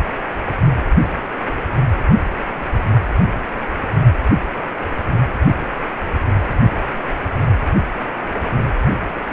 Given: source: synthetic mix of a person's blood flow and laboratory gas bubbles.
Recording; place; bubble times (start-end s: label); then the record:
Doppler ultrasound of blood flow; precordium
no bubbles
From the record:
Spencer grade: 0 (complete lack of bubble signals)